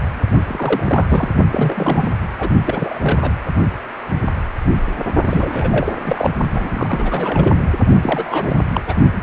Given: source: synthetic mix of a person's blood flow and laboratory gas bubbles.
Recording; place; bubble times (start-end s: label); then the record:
Doppler ultrasound of blood flow; precordium
0.47-1.28 s: bubbles
1.48-2.10 s: bubbles
2.38-2.50 s: bubbles
2.65-3.00 s: bubbles
3.03-3.33 s: bubbles
5.25-5.93 s: bubbles
6.06-6.30 s: bubbles
6.53-7.64 s: bubbles
8.01-8.58 s: bubbles
8.74-8.82 s: bubbles
8.88-8.94 s: bubbles
9.14-9.23 s: bubbles
From the record:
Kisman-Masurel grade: 332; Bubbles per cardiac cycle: rolling drumbeat, 9 or more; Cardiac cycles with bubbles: 50 to 99%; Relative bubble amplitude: moderate (0.250 to 0.450); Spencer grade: 3 (all of the cardiac periods contain showers or single bubble signals, but not dominating or overriding the cardiac motion signals); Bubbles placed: only in the low amplitude regions of the cardiac cycle